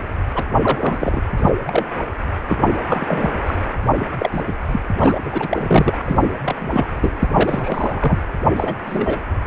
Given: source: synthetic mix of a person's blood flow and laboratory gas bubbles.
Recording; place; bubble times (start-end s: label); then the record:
Doppler ultrasound of blood flow; precordium
0.35-0.45 s: bubbles
0.62-1.23 s: bubbles
1.37-1.50 s: bubbles
1.64-1.85 s: bubbles
2.48-2.58 s: bubbles
2.60-2.68 s: bubbles
2.87-3.30 s: bubbles
3.46-3.55 s: bubbles
3.94-4.07 s: bubbles
4.18-4.43 s: bubbles
4.47-4.53 s: bubbles
4.72-4.79 s: bubbles
5.00-5.20 s: bubbles
5.25-5.48 s: bubbles
5.51-5.98 s: bubbles
6.04-6.37 s: bubbles
6.44-6.55 s: bubbles
6.58-7.28 s: bubbles
7.32-8.19 s: bubbles
8.55-8.76 s: bubbles
8.86-9.19 s: bubbles
From the record:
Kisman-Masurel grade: 243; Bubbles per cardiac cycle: several, 3 to 8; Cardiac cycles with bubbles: 100%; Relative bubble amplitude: loud (0.450 to 0.775); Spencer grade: 3 (all of the cardiac periods contain showers or single bubble signals, but not dominating or overriding the cardiac motion signals); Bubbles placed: anywhere in the cardiac cycle